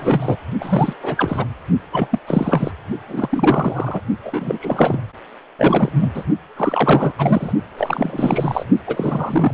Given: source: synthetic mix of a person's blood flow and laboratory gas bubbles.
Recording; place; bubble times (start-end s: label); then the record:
Doppler ultrasound of blood flow; precordium
0.00-0.36 s: bubbles
0.60-0.93 s: bubbles
1.02-1.46 s: bubbles
1.91-2.08 s: bubbles
2.11-2.19 s: bubbles
2.26-2.71 s: bubbles
3.08-4.00 s: bubbles
4.23-5.02 s: bubbles
5.58-5.92 s: bubbles
5.96-6.24 s: bubbles
6.56-7.12 s: bubbles
7.17-7.53 s: bubbles
7.78-8.64 s: bubbles
8.87-9.54 s: bubbles
From the record:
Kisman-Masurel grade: 343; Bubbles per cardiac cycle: rolling drumbeat, 9 or more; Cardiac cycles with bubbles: 100%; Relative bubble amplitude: loud (0.450 to 0.775); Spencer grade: 3 (all of the cardiac periods contain showers or single bubble signals, but not dominating or overriding the cardiac motion signals); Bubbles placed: only in the low amplitude regions of the cardiac cycle